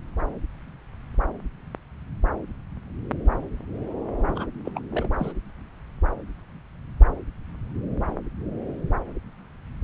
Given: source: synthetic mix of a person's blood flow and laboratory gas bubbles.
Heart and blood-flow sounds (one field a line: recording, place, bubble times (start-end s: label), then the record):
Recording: Doppler ultrasound of blood flow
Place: subclavian vein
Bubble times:
4.28-4.47 s: bubbles
4.64-4.72 s: bubbles
4.75-4.81 s: bubbles
4.91-5.09 s: bubbles
5.19-5.33 s: bubbles
From the record:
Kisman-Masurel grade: 221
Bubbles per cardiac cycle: several, 3 to 8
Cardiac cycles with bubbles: 10 to 50%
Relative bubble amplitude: barely perceptible (0.100 to 0.250)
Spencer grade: 2 (many but less than half of the cardiac periods contain bubble signals, singularly or in groups)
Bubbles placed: anywhere in the cardiac cycle